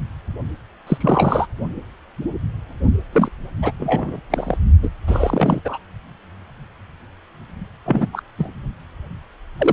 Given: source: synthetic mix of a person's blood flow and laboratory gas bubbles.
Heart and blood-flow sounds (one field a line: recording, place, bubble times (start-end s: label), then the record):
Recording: Doppler ultrasound of blood flow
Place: precordium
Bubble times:
0.86-0.97 s: bubbles
1.00-1.46 s: bubbles
3.12-3.29 s: bubbles
3.62-3.72 s: bubbles
3.79-4.20 s: bubbles
4.30-4.57 s: bubbles
4.82-4.89 s: bubbles
5.07-5.61 s: bubbles
5.64-5.78 s: bubbles
7.85-8.07 s: bubbles
8.12-8.23 s: bubbles
8.38-8.51 s: bubbles
9.58-9.72 s: bubbles
From the record:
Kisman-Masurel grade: 233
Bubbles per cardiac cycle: several, 3 to 8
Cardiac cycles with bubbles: 50 to 99%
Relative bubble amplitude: loud (0.450 to 0.775)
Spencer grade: 3 (all of the cardiac periods contain showers or single bubble signals, but not dominating or overriding the cardiac motion signals)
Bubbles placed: only in the low amplitude regions of the cardiac cycle